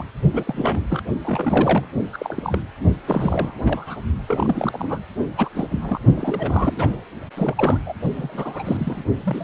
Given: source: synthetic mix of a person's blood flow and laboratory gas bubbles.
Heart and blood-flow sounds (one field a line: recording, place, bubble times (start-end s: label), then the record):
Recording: Doppler ultrasound of blood flow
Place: precordium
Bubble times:
0.00-0.02 s: bubbles
0.33-0.85 s: bubbles
0.89-1.03 s: bubbles
1.23-1.86 s: bubbles
2.13-2.60 s: bubbles
3.06-3.54 s: bubbles
3.62-3.98 s: bubbles
4.27-5.02 s: bubbles
5.37-5.50 s: bubbles
5.54-6.00 s: bubbles
6.15-6.90 s: bubbles
7.36-7.79 s: bubbles
7.86-7.94 s: bubbles
8.16-9.04 s: bubbles
9.23-9.44 s: bubbles
From the record:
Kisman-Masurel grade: 342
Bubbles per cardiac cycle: rolling drumbeat, 9 or more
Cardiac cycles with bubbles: 100%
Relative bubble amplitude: moderate (0.250 to 0.450)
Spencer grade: 3 (all of the cardiac periods contain showers or single bubble signals, but not dominating or overriding the cardiac motion signals)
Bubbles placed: only in the low amplitude regions of the cardiac cycle